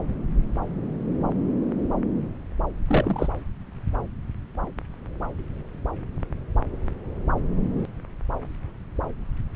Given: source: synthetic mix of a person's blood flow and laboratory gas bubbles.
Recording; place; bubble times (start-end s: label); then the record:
Doppler ultrasound of blood flow; subclavian vein
2.88-3.28 s: bubbles
From the record:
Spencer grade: 1 (occasional bubble signal discernible with the cardiac motion signal, with majority of cardiac periods free of bubbles); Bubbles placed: anywhere in the cardiac cycle